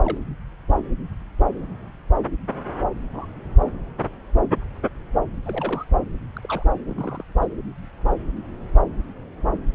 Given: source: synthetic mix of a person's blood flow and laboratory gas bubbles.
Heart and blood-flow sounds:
Doppler ultrasound of blood flow; subclavian vein
0.04-0.17 s: bubbles
3.13-3.26 s: bubbles
5.46-5.84 s: bubbles
6.36-6.39 s: bubbles
6.43-6.64 s: bubbles
6.86-7.23 s: bubbles
7.42-7.46 s: bubbles
From the record:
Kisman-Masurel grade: 121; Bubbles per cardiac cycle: 1 to 2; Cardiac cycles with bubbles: 10 to 50%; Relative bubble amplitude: barely perceptible (0.100 to 0.250); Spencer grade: 2 (many but less than half of the cardiac periods contain bubble signals, singularly or in groups); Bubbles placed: anywhere in the cardiac cycle

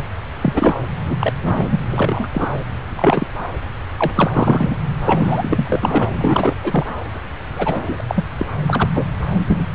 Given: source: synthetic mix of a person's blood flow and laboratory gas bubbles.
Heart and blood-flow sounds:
Doppler ultrasound of blood flow; subclavian vein
0.00-0.05 s: bubbles
0.41-0.80 s: bubbles
1.08-1.16 s: bubbles
1.19-1.33 s: bubbles
1.41-1.79 s: bubbles
1.90-2.29 s: bubbles
2.33-2.49 s: bubbles
2.96-3.27 s: bubbles
3.97-4.11 s: bubbles
4.15-4.29 s: bubbles
4.32-4.75 s: bubbles
5.05-5.80 s: bubbles
5.83-6.08 s: bubbles
6.13-6.56 s: bubbles
6.63-6.85 s: bubbles
7.56-8.01 s: bubbles
8.09-8.25 s: bubbles
8.38-8.46 s: bubbles
8.67-8.88 s: bubbles
8.94-9.04 s: bubbles
9.33-9.36 s: bubbles
9.48-9.65 s: bubbles
From the record:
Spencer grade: 3 (all of the cardiac periods contain showers or single bubble signals, but not dominating or overriding the cardiac motion signals); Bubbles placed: anywhere in the cardiac cycle

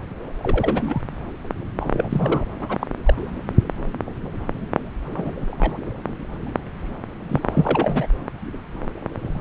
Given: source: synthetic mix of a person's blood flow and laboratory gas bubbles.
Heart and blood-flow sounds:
Doppler ultrasound of blood flow; subclavian vein
0.40-1.01 s: bubbles
1.80-2.45 s: bubbles
2.61-2.87 s: bubbles
3.06-3.14 s: bubbles
5.07-5.37 s: bubbles
5.40-5.78 s: bubbles
7.29-8.07 s: bubbles
From the record:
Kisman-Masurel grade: 232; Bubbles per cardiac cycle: several, 3 to 8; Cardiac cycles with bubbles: 50 to 99%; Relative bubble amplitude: moderate (0.250 to 0.450); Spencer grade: 3 (all of the cardiac periods contain showers or single bubble signals, but not dominating or overriding the cardiac motion signals); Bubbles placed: anywhere in the cardiac cycle

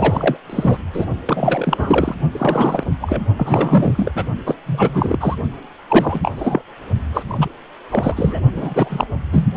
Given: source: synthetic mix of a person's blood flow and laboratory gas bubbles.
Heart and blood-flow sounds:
Doppler ultrasound of blood flow; precordium
0.00-0.37 s: bubbles
0.49-0.82 s: bubbles
0.93-1.06 s: bubbles
1.26-2.15 s: bubbles
2.31-2.83 s: bubbles
3.00-3.21 s: bubbles
3.37-4.11 s: bubbles
4.15-4.24 s: bubbles
4.45-4.55 s: bubbles
4.66-5.17 s: bubbles
5.20-5.36 s: bubbles
5.88-6.20 s: bubbles
6.22-6.31 s: bubbles
6.36-6.61 s: bubbles
7.13-7.23 s: bubbles
7.27-7.48 s: bubbles
7.89-8.42 s: bubbles
8.56-9.05 s: bubbles
9.32-9.50 s: bubbles
From the record:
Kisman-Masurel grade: 343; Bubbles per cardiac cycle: rolling drumbeat, 9 or more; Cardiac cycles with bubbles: 100%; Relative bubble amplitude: loud (0.450 to 0.775); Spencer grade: 3 (all of the cardiac periods contain showers or single bubble signals, but not dominating or overriding the cardiac motion signals); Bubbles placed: only in the low amplitude regions of the cardiac cycle

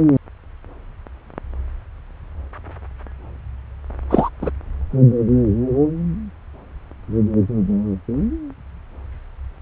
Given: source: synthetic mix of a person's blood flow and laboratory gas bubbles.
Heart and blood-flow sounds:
Doppler ultrasound of blood flow; subclavian vein
4.10-4.29 s: bubbles
4.41-4.51 s: bubbles
From the record:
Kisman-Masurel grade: 113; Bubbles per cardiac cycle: 1 to 2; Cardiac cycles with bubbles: 1 to 10%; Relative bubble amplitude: loud (0.450 to 0.775); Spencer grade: 1 (occasional bubble signal discernible with the cardiac motion signal, with majority of cardiac periods free of bubbles); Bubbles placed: anywhere in the cardiac cycle

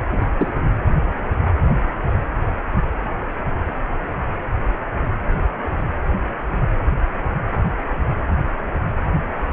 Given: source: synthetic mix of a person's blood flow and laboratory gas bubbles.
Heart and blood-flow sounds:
Doppler ultrasound of blood flow; precordium
0.12-0.25 s: bubbles
0.38-0.52 s: bubbles
From the record:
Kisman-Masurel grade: 212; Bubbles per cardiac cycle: several, 3 to 8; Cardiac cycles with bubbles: 1 to 10%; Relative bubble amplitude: moderate (0.250 to 0.450); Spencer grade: 1 (occasional bubble signal discernible with the cardiac motion signal, with majority of cardiac periods free of bubbles); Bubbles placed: anywhere in the cardiac cycle

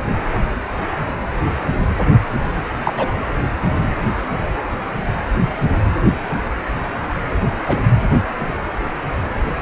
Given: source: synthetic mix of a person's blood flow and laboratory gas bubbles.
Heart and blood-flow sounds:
Doppler ultrasound of blood flow; precordium
2.83-2.94 s: bubbles
2.97-3.07 s: bubbles
7.64-7.80 s: bubbles
From the record:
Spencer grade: 2 (many but less than half of the cardiac periods contain bubble signals, singularly or in groups); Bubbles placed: anywhere in the cardiac cycle

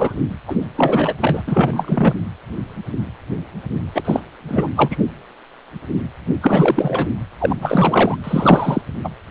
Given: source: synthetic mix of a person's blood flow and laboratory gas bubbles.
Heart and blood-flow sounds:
Doppler ultrasound of blood flow; precordium
0.00-0.18 s: bubbles
0.48-0.56 s: bubbles
0.77-1.14 s: bubbles
1.21-1.43 s: bubbles
1.47-2.12 s: bubbles
3.95-4.20 s: bubbles
4.48-4.67 s: bubbles
4.75-4.97 s: bubbles
6.42-7.08 s: bubbles
7.39-8.16 s: bubbles
8.23-8.81 s: bubbles
9.04-9.09 s: bubbles
From the record:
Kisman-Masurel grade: 333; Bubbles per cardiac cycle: rolling drumbeat, 9 or more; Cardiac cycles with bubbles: 50 to 99%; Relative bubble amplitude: loud (0.450 to 0.775); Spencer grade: 3 (all of the cardiac periods contain showers or single bubble signals, but not dominating or overriding the cardiac motion signals); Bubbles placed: anywhere in the cardiac cycle

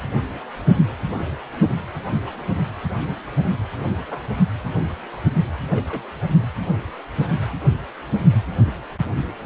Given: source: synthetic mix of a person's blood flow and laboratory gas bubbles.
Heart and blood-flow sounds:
Doppler ultrasound of blood flow; precordium
2.27-2.31 s: bubbles
3.43-3.56 s: bubbles
4.11-4.19 s: bubbles
5.71-6.11 s: bubbles
From the record:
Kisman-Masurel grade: 121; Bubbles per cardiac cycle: 1 to 2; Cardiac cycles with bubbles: 10 to 50%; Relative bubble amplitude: barely perceptible (0.100 to 0.250); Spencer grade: 2 (many but less than half of the cardiac periods contain bubble signals, singularly or in groups); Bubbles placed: only in the low amplitude regions of the cardiac cycle

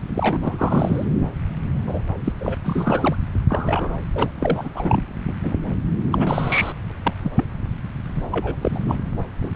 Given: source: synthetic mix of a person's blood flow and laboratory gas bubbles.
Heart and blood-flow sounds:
Doppler ultrasound of blood flow; subclavian vein
0.08-1.05 s: bubbles
1.87-2.00 s: bubbles
2.24-2.33 s: bubbles
2.39-2.55 s: bubbles
2.64-3.16 s: bubbles
3.48-3.95 s: bubbles
4.14-4.30 s: bubbles
4.40-4.69 s: bubbles
4.75-5.04 s: bubbles
5.27-5.35 s: bubbles
5.43-5.54 s: bubbles
6.12-6.72 s: bubbles
6.89-6.92 s: bubbles
7.04-7.13 s: bubbles
7.21-7.32 s: bubbles
7.36-7.44 s: bubbles
8.15-8.22 s: bubbles
8.30-8.56 s: bubbles
8.61-8.96 s: bubbles
9.41-9.52 s: bubbles
From the record:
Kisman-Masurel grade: 233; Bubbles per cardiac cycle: several, 3 to 8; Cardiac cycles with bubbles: 50 to 99%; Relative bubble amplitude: loud (0.450 to 0.775); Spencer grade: 3 (all of the cardiac periods contain showers or single bubble signals, but not dominating or overriding the cardiac motion signals); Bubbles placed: anywhere in the cardiac cycle

